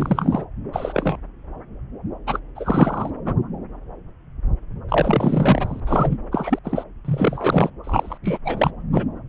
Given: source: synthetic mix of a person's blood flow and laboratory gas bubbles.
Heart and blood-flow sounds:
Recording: Doppler ultrasound of blood flow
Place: subclavian vein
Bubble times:
0.00-0.45 s: bubbles
0.72-1.17 s: bubbles
2.27-2.40 s: bubbles
2.55-3.10 s: bubbles
3.25-3.33 s: bubbles
4.88-5.80 s: bubbles
5.87-6.17 s: bubbles
6.31-6.58 s: bubbles
6.63-6.83 s: bubbles
7.04-7.70 s: bubbles
7.83-8.18 s: bubbles
8.24-8.38 s: bubbles
8.45-8.71 s: bubbles
8.92-9.04 s: bubbles
From the record:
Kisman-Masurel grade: 333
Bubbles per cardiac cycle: rolling drumbeat, 9 or more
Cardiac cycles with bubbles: 50 to 99%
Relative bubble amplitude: loud (0.450 to 0.775)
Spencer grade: 3 (all of the cardiac periods contain showers or single bubble signals, but not dominating or overriding the cardiac motion signals)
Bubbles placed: anywhere in the cardiac cycle

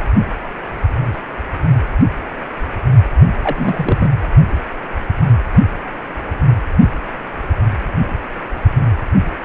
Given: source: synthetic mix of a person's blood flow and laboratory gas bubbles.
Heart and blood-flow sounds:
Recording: Doppler ultrasound of blood flow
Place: precordium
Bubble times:
3.42-4.11 s: bubbles
From the record:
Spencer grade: 1 (occasional bubble signal discernible with the cardiac motion signal, with majority of cardiac periods free of bubbles)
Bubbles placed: only in the low amplitude regions of the cardiac cycle

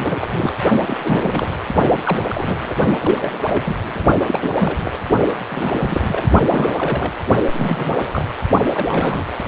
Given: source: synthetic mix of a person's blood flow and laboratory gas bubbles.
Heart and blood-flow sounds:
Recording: Doppler ultrasound of blood flow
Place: precordium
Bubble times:
0.00-0.59 s: bubbles
0.86-1.58 s: bubbles
1.90-2.75 s: bubbles
3.00-3.76 s: bubbles
3.94-4.00 s: bubbles
4.26-4.96 s: bubbles
5.50-6.29 s: bubbles
6.48-7.13 s: bubbles
7.54-8.25 s: bubbles
8.64-8.72 s: bubbles
8.74-9.36 s: bubbles
From the record:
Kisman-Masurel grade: 342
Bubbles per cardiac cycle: rolling drumbeat, 9 or more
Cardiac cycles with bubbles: 100%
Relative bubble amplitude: moderate (0.250 to 0.450)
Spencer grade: 3 (all of the cardiac periods contain showers or single bubble signals, but not dominating or overriding the cardiac motion signals)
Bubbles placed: only in the low amplitude regions of the cardiac cycle

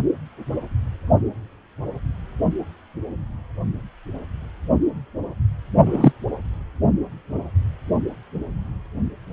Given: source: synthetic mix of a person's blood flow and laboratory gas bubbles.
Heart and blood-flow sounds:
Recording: Doppler ultrasound of blood flow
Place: precordium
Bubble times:
5.85-6.12 s: bubbles
From the record:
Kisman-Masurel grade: 123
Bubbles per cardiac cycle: 1 to 2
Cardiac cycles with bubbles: 10 to 50%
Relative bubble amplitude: loud (0.450 to 0.775)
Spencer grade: 2 (many but less than half of the cardiac periods contain bubble signals, singularly or in groups)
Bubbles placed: only in the low amplitude regions of the cardiac cycle

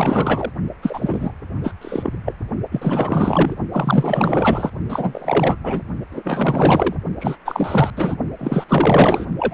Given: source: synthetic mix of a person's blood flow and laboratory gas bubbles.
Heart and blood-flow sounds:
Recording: Doppler ultrasound of blood flow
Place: precordium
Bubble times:
0.00-0.52 s: bubbles
0.82-1.31 s: bubbles
1.64-1.74 s: bubbles
1.81-2.18 s: bubbles
2.25-2.35 s: bubbles
2.71-3.55 s: bubbles
3.71-4.71 s: bubbles
4.89-5.56 s: bubbles
5.63-5.82 s: bubbles
6.11-6.95 s: bubbles
7.19-7.36 s: bubbles
7.45-7.90 s: bubbles
7.96-8.16 s: bubbles
8.38-8.65 s: bubbles
8.67-9.25 s: bubbles
9.38-9.53 s: bubbles
From the record:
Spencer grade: 4 (maximum detectable bubble signal sounding continuously throughout systole and diastole of every cardiac period, and overriding the amplitude of the normal cardiac signals)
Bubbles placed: only in the low amplitude regions of the cardiac cycle

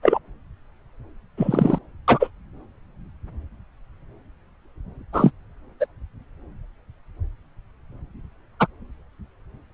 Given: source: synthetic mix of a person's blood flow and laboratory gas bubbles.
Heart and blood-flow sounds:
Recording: Doppler ultrasound of blood flow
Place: subclavian vein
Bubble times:
0.02-0.18 s: bubbles
1.37-1.78 s: bubbles
2.08-2.30 s: bubbles
5.12-5.31 s: bubbles
5.79-5.86 s: bubbles
8.59-8.67 s: bubbles
From the record:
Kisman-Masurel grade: 123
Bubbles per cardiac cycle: 1 to 2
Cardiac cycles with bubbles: 10 to 50%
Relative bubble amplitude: loud (0.450 to 0.775)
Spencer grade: 2 (many but less than half of the cardiac periods contain bubble signals, singularly or in groups)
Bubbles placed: anywhere in the cardiac cycle

